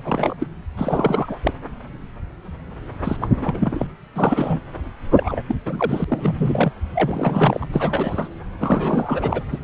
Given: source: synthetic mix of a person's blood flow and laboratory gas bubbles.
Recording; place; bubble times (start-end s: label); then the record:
Doppler ultrasound of blood flow; subclavian vein
0.04-0.36 s: bubbles
0.40-0.46 s: bubbles
0.77-1.37 s: bubbles
1.42-1.53 s: bubbles
3.04-3.17 s: bubbles
3.21-3.28 s: bubbles
3.41-3.87 s: bubbles
4.15-4.59 s: bubbles
5.11-5.42 s: bubbles
5.46-5.55 s: bubbles
5.65-6.04 s: bubbles
6.07-6.72 s: bubbles
6.95-7.68 s: bubbles
7.72-8.29 s: bubbles
8.61-9.43 s: bubbles
9.51-9.59 s: bubbles
From the record:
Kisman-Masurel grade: 332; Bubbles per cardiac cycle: rolling drumbeat, 9 or more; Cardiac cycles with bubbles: 50 to 99%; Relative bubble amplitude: moderate (0.250 to 0.450); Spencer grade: 3 (all of the cardiac periods contain showers or single bubble signals, but not dominating or overriding the cardiac motion signals); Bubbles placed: anywhere in the cardiac cycle